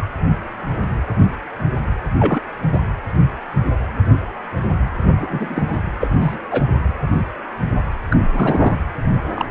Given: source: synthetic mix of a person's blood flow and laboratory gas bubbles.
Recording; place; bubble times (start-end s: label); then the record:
Doppler ultrasound of blood flow; precordium
2.18-2.41 s: bubbles
2.72-2.79 s: bubbles
5.18-5.83 s: bubbles
6.00-6.40 s: bubbles
6.51-6.64 s: bubbles
8.10-8.17 s: bubbles
8.33-8.74 s: bubbles
9.35-9.46 s: bubbles
From the record:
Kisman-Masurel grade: 233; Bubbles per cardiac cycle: several, 3 to 8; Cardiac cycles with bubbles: 50 to 99%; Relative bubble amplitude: loud (0.450 to 0.775); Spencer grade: 3 (all of the cardiac periods contain showers or single bubble signals, but not dominating or overriding the cardiac motion signals); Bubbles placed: anywhere in the cardiac cycle